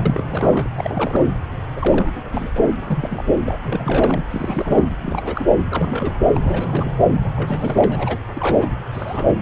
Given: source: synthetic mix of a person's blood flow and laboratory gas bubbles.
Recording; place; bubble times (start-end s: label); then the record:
Doppler ultrasound of blood flow; subclavian vein
0.00-0.03 s: bubbles
0.05-0.69 s: bubbles
0.77-1.23 s: bubbles
1.76-2.50 s: bubbles
2.54-2.63 s: bubbles
2.67-2.72 s: bubbles
2.80-3.23 s: bubbles
3.45-3.54 s: bubbles
3.64-4.24 s: bubbles
4.31-4.89 s: bubbles
4.99-5.49 s: bubbles
5.71-6.14 s: bubbles
6.33-6.91 s: bubbles
7.36-8.18 s: bubbles
8.34-8.70 s: bubbles
8.93-9.34 s: bubbles
From the record:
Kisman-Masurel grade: 342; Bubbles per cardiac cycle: rolling drumbeat, 9 or more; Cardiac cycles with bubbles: 100%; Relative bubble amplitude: moderate (0.250 to 0.450); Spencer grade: 3 (all of the cardiac periods contain showers or single bubble signals, but not dominating or overriding the cardiac motion signals); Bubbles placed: anywhere in the cardiac cycle